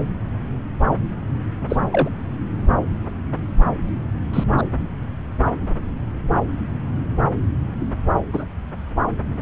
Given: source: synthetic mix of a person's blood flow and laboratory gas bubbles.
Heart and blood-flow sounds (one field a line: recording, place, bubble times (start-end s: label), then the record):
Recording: Doppler ultrasound of blood flow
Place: subclavian vein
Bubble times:
1.70-1.77 s: bubbles
1.92-2.10 s: bubbles
4.33-4.44 s: bubbles
4.58-4.62 s: bubbles
8.33-8.45 s: bubbles
From the record:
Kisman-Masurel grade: 123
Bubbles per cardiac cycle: 1 to 2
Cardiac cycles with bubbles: 10 to 50%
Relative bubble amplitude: loud (0.450 to 0.775)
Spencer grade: 2 (many but less than half of the cardiac periods contain bubble signals, singularly or in groups)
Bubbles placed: anywhere in the cardiac cycle